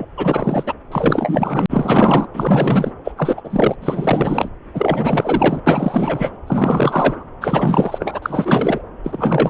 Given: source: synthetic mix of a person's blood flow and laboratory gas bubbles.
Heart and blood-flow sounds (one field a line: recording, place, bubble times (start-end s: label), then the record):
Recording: Doppler ultrasound of blood flow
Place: subclavian vein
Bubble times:
0.00-0.05 s: bubbles
0.17-0.74 s: bubbles
0.92-1.66 s: bubbles
1.70-2.26 s: bubbles
2.33-2.92 s: bubbles
3.04-3.12 s: bubbles
3.17-3.41 s: bubbles
3.44-3.75 s: bubbles
3.81-4.49 s: bubbles
4.74-5.61 s: bubbles
5.66-6.32 s: bubbles
6.47-7.24 s: bubbles
7.41-8.20 s: bubbles
8.22-8.83 s: bubbles
9.04-9.50 s: bubbles
From the record:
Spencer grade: 4 (maximum detectable bubble signal sounding continuously throughout systole and diastole of every cardiac period, and overriding the amplitude of the normal cardiac signals)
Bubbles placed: anywhere in the cardiac cycle